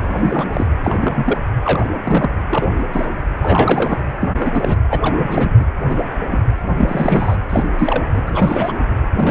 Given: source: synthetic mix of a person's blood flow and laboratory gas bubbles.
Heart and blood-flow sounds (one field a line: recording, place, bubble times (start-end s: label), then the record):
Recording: Doppler ultrasound of blood flow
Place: precordium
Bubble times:
0.02-0.66 s: bubbles
0.84-1.38 s: bubbles
1.63-1.85 s: bubbles
2.04-2.30 s: bubbles
2.49-2.69 s: bubbles
2.92-3.07 s: bubbles
3.42-4.00 s: bubbles
4.21-4.34 s: bubbles
4.39-4.81 s: bubbles
4.90-5.49 s: bubbles
5.60-5.65 s: bubbles
5.88-6.03 s: bubbles
6.31-6.39 s: bubbles
6.78-7.37 s: bubbles
7.50-7.65 s: bubbles
7.78-8.04 s: bubbles
8.13-8.22 s: bubbles
8.26-8.81 s: bubbles
9.16-9.30 s: bubbles
From the record:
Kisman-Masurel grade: 232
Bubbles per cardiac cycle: several, 3 to 8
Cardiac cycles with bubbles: 50 to 99%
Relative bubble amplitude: moderate (0.250 to 0.450)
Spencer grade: 3 (all of the cardiac periods contain showers or single bubble signals, but not dominating or overriding the cardiac motion signals)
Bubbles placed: anywhere in the cardiac cycle